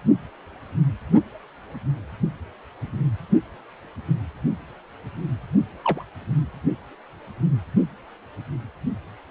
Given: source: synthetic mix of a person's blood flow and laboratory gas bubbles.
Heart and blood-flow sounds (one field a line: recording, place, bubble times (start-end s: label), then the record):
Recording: Doppler ultrasound of blood flow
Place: precordium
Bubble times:
5.84-6.04 s: bubbles
From the record:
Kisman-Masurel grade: 111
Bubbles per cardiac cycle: 1 to 2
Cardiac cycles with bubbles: 1 to 10%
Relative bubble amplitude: barely perceptible (0.100 to 0.250)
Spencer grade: 1 (occasional bubble signal discernible with the cardiac motion signal, with majority of cardiac periods free of bubbles)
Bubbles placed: only in the low amplitude regions of the cardiac cycle